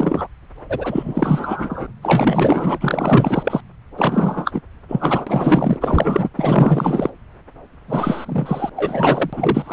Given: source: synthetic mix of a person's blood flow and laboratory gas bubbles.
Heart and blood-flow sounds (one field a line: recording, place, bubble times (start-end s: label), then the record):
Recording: Doppler ultrasound of blood flow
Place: subclavian vein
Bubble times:
0.00-0.28 s: bubbles
0.69-1.86 s: bubbles
2.02-3.60 s: bubbles
3.98-4.62 s: bubbles
4.88-5.79 s: bubbles
5.81-6.30 s: bubbles
6.37-7.10 s: bubbles
7.88-8.70 s: bubbles
8.76-9.30 s: bubbles
9.33-9.72 s: bubbles
From the record:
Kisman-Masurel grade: 444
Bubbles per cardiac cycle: continuous sound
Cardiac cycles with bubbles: 100%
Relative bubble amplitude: maximal (0.775 to 0.999)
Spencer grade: 4 (maximum detectable bubble signal sounding continuously throughout systole and diastole of every cardiac period, and overriding the amplitude of the normal cardiac signals)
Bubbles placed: anywhere in the cardiac cycle